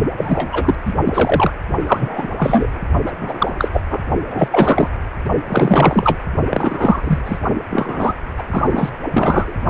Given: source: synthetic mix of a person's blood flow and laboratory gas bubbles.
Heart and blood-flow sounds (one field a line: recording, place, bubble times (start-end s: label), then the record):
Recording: Doppler ultrasound of blood flow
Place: precordium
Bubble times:
0.16-0.75 s: bubbles
0.85-0.95 s: bubbles
1.04-1.51 s: bubbles
1.87-2.28 s: bubbles
2.38-2.67 s: bubbles
3.06-3.12 s: bubbles
3.21-3.56 s: bubbles
3.58-3.80 s: bubbles
3.89-4.03 s: bubbles
4.30-4.48 s: bubbles
4.51-4.91 s: bubbles
5.46-6.18 s: bubbles
6.49-7.20 s: bubbles
7.24-7.38 s: bubbles
7.71-8.14 s: bubbles
8.38-8.43 s: bubbles
8.51-8.89 s: bubbles
9.13-9.54 s: bubbles
From the record:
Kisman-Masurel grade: 343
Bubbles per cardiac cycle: rolling drumbeat, 9 or more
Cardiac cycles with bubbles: 100%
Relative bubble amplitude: loud (0.450 to 0.775)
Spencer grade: 3 (all of the cardiac periods contain showers or single bubble signals, but not dominating or overriding the cardiac motion signals)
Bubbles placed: only in the low amplitude regions of the cardiac cycle